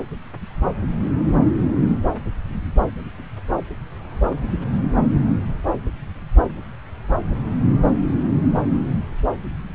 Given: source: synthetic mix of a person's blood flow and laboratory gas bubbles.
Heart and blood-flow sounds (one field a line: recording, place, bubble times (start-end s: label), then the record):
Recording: Doppler ultrasound of blood flow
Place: subclavian vein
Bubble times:
4.32-4.34 s: bubbles
From the record:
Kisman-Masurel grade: 111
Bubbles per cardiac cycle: 1 to 2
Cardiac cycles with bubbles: 1 to 10%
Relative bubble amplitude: barely perceptible (0.100 to 0.250)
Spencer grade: 1 (occasional bubble signal discernible with the cardiac motion signal, with majority of cardiac periods free of bubbles)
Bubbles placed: anywhere in the cardiac cycle